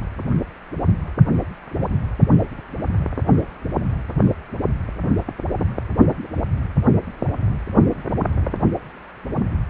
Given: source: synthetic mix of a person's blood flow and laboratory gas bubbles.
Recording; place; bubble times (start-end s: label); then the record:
Doppler ultrasound of blood flow; precordium
1.27-1.31 s: bubbles
1.69-1.88 s: bubbles
From the record:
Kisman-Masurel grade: 211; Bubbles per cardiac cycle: several, 3 to 8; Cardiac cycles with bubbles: 1 to 10%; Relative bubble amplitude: barely perceptible (0.100 to 0.250); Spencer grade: 1 (occasional bubble signal discernible with the cardiac motion signal, with majority of cardiac periods free of bubbles); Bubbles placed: anywhere in the cardiac cycle